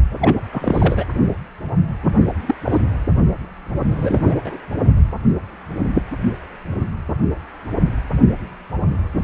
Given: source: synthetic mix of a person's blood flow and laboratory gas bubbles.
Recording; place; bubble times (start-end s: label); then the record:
Doppler ultrasound of blood flow; precordium
0.20-0.37 s: bubbles
0.51-1.05 s: bubbles
2.46-2.55 s: bubbles
2.65-2.81 s: bubbles
3.90-4.37 s: bubbles
4.44-4.58 s: bubbles
From the record:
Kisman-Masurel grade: 222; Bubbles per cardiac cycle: several, 3 to 8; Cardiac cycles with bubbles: 10 to 50%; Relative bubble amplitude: moderate (0.250 to 0.450); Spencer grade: 2 (many but less than half of the cardiac periods contain bubble signals, singularly or in groups); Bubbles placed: only in the low amplitude regions of the cardiac cycle